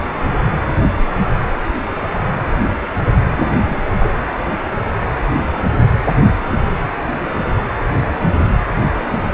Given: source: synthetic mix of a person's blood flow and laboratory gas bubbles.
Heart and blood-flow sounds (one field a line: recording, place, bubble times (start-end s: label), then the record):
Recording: Doppler ultrasound of blood flow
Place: precordium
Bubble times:
3.35-3.84 s: bubbles
4.00-4.14 s: bubbles
From the record:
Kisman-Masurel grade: 211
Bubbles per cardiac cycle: several, 3 to 8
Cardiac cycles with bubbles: 1 to 10%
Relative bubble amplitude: barely perceptible (0.100 to 0.250)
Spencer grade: 1 (occasional bubble signal discernible with the cardiac motion signal, with majority of cardiac periods free of bubbles)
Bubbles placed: anywhere in the cardiac cycle